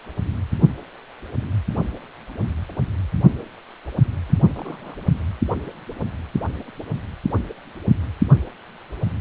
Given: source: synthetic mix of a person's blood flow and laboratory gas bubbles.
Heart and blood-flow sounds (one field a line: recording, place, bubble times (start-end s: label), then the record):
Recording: Doppler ultrasound of blood flow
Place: precordium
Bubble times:
4.29-4.96 s: bubbles
5.27-5.32 s: bubbles
From the record:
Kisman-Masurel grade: 211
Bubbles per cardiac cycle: several, 3 to 8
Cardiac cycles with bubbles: 1 to 10%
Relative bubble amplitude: barely perceptible (0.100 to 0.250)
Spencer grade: 1 (occasional bubble signal discernible with the cardiac motion signal, with majority of cardiac periods free of bubbles)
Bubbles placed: anywhere in the cardiac cycle